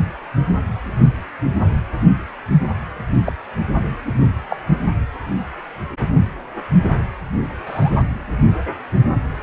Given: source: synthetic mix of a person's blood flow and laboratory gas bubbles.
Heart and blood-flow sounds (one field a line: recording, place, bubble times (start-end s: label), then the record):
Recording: Doppler ultrasound of blood flow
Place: precordium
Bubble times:
3.25-3.32 s: bubbles
4.50-4.57 s: bubbles
7.67-8.04 s: bubbles
From the record:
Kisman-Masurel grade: 122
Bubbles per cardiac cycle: 1 to 2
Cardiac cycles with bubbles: 10 to 50%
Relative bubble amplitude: moderate (0.250 to 0.450)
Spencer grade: 2 (many but less than half of the cardiac periods contain bubble signals, singularly or in groups)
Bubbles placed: only in the low amplitude regions of the cardiac cycle